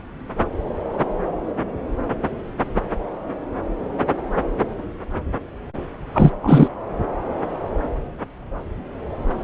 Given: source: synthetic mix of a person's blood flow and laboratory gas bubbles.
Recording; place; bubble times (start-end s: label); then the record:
Doppler ultrasound of blood flow; subclavian vein
6.14-6.30 s: bubbles
6.42-6.68 s: bubbles
From the record:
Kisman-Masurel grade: 213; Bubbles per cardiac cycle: several, 3 to 8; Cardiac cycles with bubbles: 1 to 10%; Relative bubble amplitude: loud (0.450 to 0.775); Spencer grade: 1 (occasional bubble signal discernible with the cardiac motion signal, with majority of cardiac periods free of bubbles); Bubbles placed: anywhere in the cardiac cycle